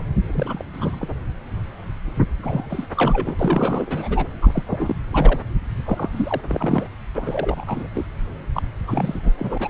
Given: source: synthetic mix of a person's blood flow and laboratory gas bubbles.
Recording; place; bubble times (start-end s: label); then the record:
Doppler ultrasound of blood flow; subclavian vein
0.00-0.03 s: bubbles
0.26-0.64 s: bubbles
0.73-1.08 s: bubbles
2.42-2.87 s: bubbles
2.96-3.36 s: bubbles
3.39-4.28 s: bubbles
4.42-4.63 s: bubbles
4.66-4.96 s: bubbles
5.11-5.41 s: bubbles
5.85-6.08 s: bubbles
6.12-6.41 s: bubbles
6.47-6.88 s: bubbles
7.15-7.88 s: bubbles
7.94-8.06 s: bubbles
8.52-8.62 s: bubbles
8.88-9.18 s: bubbles
9.22-9.31 s: bubbles
9.38-9.70 s: bubbles
From the record:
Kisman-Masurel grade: 332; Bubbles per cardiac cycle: rolling drumbeat, 9 or more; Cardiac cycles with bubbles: 50 to 99%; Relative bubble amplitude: moderate (0.250 to 0.450); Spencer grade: 3 (all of the cardiac periods contain showers or single bubble signals, but not dominating or overriding the cardiac motion signals); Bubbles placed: anywhere in the cardiac cycle